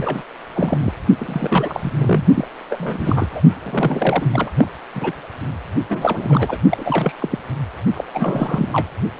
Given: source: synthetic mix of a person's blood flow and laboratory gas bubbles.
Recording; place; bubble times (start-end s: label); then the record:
Doppler ultrasound of blood flow; precordium
0.00-0.23 s: bubbles
0.55-0.91 s: bubbles
1.16-1.92 s: bubbles
1.96-2.24 s: bubbles
2.35-2.48 s: bubbles
2.70-3.42 s: bubbles
3.64-4.26 s: bubbles
4.33-4.50 s: bubbles
4.57-4.67 s: bubbles
4.94-5.12 s: bubbles
5.89-6.57 s: bubbles
6.69-7.14 s: bubbles
7.19-7.39 s: bubbles
7.94-8.04 s: bubbles
8.13-8.87 s: bubbles
From the record:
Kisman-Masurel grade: 342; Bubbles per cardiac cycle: rolling drumbeat, 9 or more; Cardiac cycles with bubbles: 100%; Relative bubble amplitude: moderate (0.250 to 0.450); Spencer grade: 3 (all of the cardiac periods contain showers or single bubble signals, but not dominating or overriding the cardiac motion signals); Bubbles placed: only in the low amplitude regions of the cardiac cycle